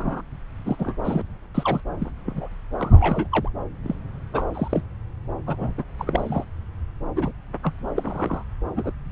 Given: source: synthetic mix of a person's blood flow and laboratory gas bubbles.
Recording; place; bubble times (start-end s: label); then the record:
Doppler ultrasound of blood flow; subclavian vein
0.00-0.21 s: bubbles
0.65-0.76 s: bubbles
0.79-0.95 s: bubbles
1.04-1.23 s: bubbles
1.54-1.81 s: bubbles
2.00-2.11 s: bubbles
2.26-2.48 s: bubbles
2.78-3.27 s: bubbles
3.31-3.50 s: bubbles
3.84-3.95 s: bubbles
4.33-4.45 s: bubbles
4.53-4.81 s: bubbles
5.46-5.84 s: bubbles
5.98-6.44 s: bubbles
7.15-7.31 s: bubbles
7.63-7.73 s: bubbles
7.95-8.44 s: bubbles
8.76-8.93 s: bubbles
From the record:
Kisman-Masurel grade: 232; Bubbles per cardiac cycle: several, 3 to 8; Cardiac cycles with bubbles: 50 to 99%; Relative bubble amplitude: moderate (0.250 to 0.450); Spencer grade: 3 (all of the cardiac periods contain showers or single bubble signals, but not dominating or overriding the cardiac motion signals); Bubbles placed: anywhere in the cardiac cycle